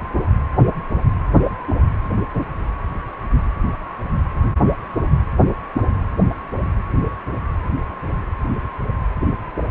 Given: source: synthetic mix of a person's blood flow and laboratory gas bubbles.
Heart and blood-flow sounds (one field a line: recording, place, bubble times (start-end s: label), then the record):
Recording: Doppler ultrasound of blood flow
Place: precordium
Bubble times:
no bubbles
From the record:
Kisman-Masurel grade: 000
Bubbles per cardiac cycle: 0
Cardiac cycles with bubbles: 0%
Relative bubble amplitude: no bubbles discernible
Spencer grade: 0 (complete lack of bubble signals)